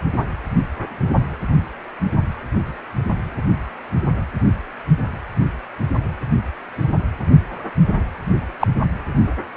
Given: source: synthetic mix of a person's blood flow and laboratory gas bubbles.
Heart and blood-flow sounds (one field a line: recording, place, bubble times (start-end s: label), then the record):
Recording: Doppler ultrasound of blood flow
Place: precordium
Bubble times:
8.59-8.67 s: bubbles
From the record:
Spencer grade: 1 (occasional bubble signal discernible with the cardiac motion signal, with majority of cardiac periods free of bubbles)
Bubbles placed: only in the low amplitude regions of the cardiac cycle